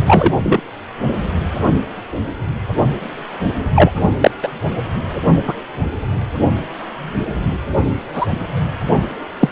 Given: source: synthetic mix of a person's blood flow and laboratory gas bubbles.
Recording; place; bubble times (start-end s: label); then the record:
Doppler ultrasound of blood flow; precordium
0.05-0.33 s: bubbles
0.44-0.61 s: bubbles
3.75-3.91 s: bubbles
4.21-4.31 s: bubbles
4.42-4.48 s: bubbles
5.46-5.54 s: bubbles
8.14-8.26 s: bubbles
9.40-9.50 s: bubbles
From the record:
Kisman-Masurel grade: 123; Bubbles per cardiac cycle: 1 to 2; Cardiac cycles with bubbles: 10 to 50%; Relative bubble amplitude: loud (0.450 to 0.775); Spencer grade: 2 (many but less than half of the cardiac periods contain bubble signals, singularly or in groups); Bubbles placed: anywhere in the cardiac cycle